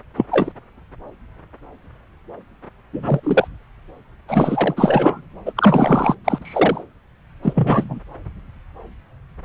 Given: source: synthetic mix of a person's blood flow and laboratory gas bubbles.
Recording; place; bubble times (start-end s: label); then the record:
Doppler ultrasound of blood flow; subclavian vein
0.17-0.26 s: bubbles
0.31-0.52 s: bubbles
2.92-3.20 s: bubbles
3.23-3.47 s: bubbles
4.28-5.21 s: bubbles
5.46-5.53 s: bubbles
5.56-6.15 s: bubbles
6.25-6.39 s: bubbles
6.42-6.84 s: bubbles
7.43-8.00 s: bubbles
From the record:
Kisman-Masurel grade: 223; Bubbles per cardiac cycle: several, 3 to 8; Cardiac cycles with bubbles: 10 to 50%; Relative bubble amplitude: loud (0.450 to 0.775); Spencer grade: 2 (many but less than half of the cardiac periods contain bubble signals, singularly or in groups); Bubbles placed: anywhere in the cardiac cycle